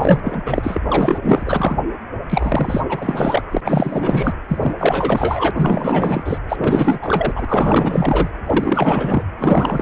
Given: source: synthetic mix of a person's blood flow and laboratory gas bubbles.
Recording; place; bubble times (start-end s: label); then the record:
Doppler ultrasound of blood flow; precordium
0.00-0.20 s: bubbles
0.23-0.82 s: bubbles
0.89-1.18 s: bubbles
1.22-1.82 s: bubbles
2.29-2.81 s: bubbles
2.89-3.45 s: bubbles
3.51-3.61 s: bubbles
3.65-4.33 s: bubbles
4.49-4.75 s: bubbles
4.79-5.51 s: bubbles
5.56-6.38 s: bubbles
6.49-6.99 s: bubbles
7.02-8.31 s: bubbles
8.46-9.22 s: bubbles
9.39-9.82 s: bubbles
From the record:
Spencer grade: 4 (maximum detectable bubble signal sounding continuously throughout systole and diastole of every cardiac period, and overriding the amplitude of the normal cardiac signals); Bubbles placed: anywhere in the cardiac cycle